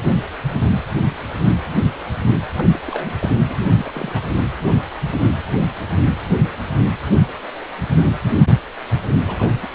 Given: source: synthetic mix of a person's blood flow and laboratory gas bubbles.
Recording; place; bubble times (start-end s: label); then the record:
Doppler ultrasound of blood flow; precordium
2.55-2.80 s: bubbles
2.88-3.13 s: bubbles
3.20-3.29 s: bubbles
3.46-3.57 s: bubbles
3.62-4.21 s: bubbles
9.26-9.55 s: bubbles
9.62-9.68 s: bubbles
From the record:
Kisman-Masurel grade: 221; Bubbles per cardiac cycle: several, 3 to 8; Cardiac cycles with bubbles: 10 to 50%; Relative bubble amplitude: barely perceptible (0.100 to 0.250); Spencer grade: 2 (many but less than half of the cardiac periods contain bubble signals, singularly or in groups); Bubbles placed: anywhere in the cardiac cycle